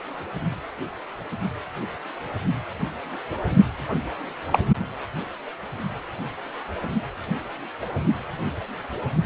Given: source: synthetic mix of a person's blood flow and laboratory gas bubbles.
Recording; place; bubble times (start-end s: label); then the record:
Doppler ultrasound of blood flow; precordium
4.50-4.59 s: bubbles
From the record:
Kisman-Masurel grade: 113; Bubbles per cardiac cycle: 1 to 2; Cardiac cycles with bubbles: 1 to 10%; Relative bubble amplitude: loud (0.450 to 0.775); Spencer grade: 1 (occasional bubble signal discernible with the cardiac motion signal, with majority of cardiac periods free of bubbles); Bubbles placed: only in the low amplitude regions of the cardiac cycle